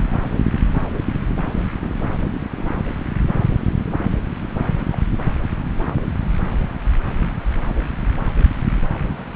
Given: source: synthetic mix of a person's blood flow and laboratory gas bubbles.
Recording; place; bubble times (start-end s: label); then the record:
Doppler ultrasound of blood flow; subclavian vein
2.56-2.71 s: bubbles
3.35-3.44 s: bubbles
4.37-4.48 s: bubbles
4.93-4.98 s: bubbles
From the record:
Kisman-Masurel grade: 121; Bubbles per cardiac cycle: 1 to 2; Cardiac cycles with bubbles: 10 to 50%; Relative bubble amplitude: barely perceptible (0.100 to 0.250); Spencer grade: 2 (many but less than half of the cardiac periods contain bubble signals, singularly or in groups); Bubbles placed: anywhere in the cardiac cycle